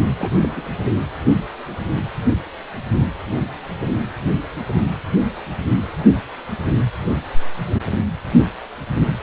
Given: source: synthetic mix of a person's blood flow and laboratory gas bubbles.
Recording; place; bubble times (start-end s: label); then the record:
Doppler ultrasound of blood flow; precordium
0.17-0.31 s: bubbles
0.40-0.49 s: bubbles
0.56-0.61 s: bubbles
0.85-0.92 s: bubbles
From the record:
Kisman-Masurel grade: 221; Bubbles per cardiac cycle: several, 3 to 8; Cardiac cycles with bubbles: 10 to 50%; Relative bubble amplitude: barely perceptible (0.100 to 0.250); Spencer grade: 2 (many but less than half of the cardiac periods contain bubble signals, singularly or in groups); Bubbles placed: anywhere in the cardiac cycle